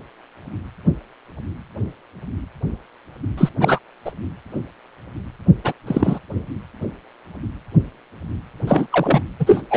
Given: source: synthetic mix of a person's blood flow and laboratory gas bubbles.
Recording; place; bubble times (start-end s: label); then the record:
Doppler ultrasound of blood flow; precordium
3.38-3.49 s: bubbles
3.59-3.79 s: bubbles
4.04-4.12 s: bubbles
5.64-5.73 s: bubbles
5.87-6.19 s: bubbles
8.67-8.87 s: bubbles
8.91-9.23 s: bubbles
9.39-9.62 s: bubbles
9.70-9.76 s: bubbles
From the record:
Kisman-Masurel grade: 223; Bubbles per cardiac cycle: several, 3 to 8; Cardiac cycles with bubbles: 10 to 50%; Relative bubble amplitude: loud (0.450 to 0.775); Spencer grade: 2 (many but less than half of the cardiac periods contain bubble signals, singularly or in groups); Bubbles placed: anywhere in the cardiac cycle